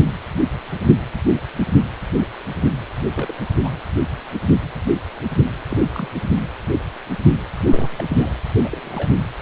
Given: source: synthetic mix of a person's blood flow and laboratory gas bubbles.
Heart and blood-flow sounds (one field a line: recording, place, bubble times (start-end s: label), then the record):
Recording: Doppler ultrasound of blood flow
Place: precordium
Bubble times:
3.15-3.33 s: bubbles
3.46-3.50 s: bubbles
3.63-3.71 s: bubbles
5.71-5.78 s: bubbles
5.92-6.08 s: bubbles
7.65-8.04 s: bubbles
8.08-8.32 s: bubbles
8.63-8.68 s: bubbles
8.71-9.12 s: bubbles
From the record:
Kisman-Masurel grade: 221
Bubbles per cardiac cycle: several, 3 to 8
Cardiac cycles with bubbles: 10 to 50%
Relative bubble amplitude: barely perceptible (0.100 to 0.250)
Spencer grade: 2 (many but less than half of the cardiac periods contain bubble signals, singularly or in groups)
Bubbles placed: anywhere in the cardiac cycle